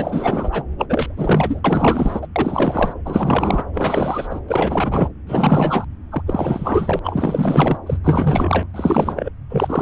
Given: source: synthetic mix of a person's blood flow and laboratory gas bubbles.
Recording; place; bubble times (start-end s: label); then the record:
Doppler ultrasound of blood flow; subclavian vein
0.00-0.64 s: bubbles
0.78-0.86 s: bubbles
0.89-1.61 s: bubbles
1.64-2.27 s: bubbles
2.35-2.93 s: bubbles
3.05-3.64 s: bubbles
3.73-4.40 s: bubbles
4.48-5.09 s: bubbles
5.27-5.84 s: bubbles
6.11-6.22 s: bubbles
6.26-7.00 s: bubbles
7.04-7.77 s: bubbles
7.86-7.98 s: bubbles
8.04-8.68 s: bubbles
8.74-9.30 s: bubbles
9.50-9.82 s: bubbles
From the record:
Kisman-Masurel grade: 444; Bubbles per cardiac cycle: continuous sound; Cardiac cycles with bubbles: 100%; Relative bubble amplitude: maximal (0.775 to 0.999); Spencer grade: 4 (maximum detectable bubble signal sounding continuously throughout systole and diastole of every cardiac period, and overriding the amplitude of the normal cardiac signals); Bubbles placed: anywhere in the cardiac cycle